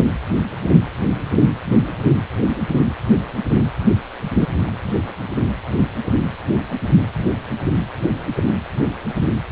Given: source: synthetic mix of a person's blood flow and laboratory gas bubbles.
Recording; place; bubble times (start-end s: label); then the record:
Doppler ultrasound of blood flow; precordium
4.67-4.72 s: bubbles
5.06-5.15 s: bubbles
5.22-5.47 s: bubbles
From the record:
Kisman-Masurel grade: 211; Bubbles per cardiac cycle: several, 3 to 8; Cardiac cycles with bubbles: 1 to 10%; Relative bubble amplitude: barely perceptible (0.100 to 0.250); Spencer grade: 1 (occasional bubble signal discernible with the cardiac motion signal, with majority of cardiac periods free of bubbles); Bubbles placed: anywhere in the cardiac cycle